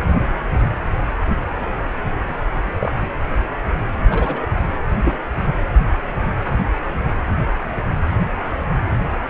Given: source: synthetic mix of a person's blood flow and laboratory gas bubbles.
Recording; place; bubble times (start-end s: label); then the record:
Doppler ultrasound of blood flow; precordium
2.80-2.92 s: bubbles
3.01-3.08 s: bubbles
4.10-4.44 s: bubbles
4.92-5.17 s: bubbles
From the record:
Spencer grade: 2 (many but less than half of the cardiac periods contain bubble signals, singularly or in groups); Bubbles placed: anywhere in the cardiac cycle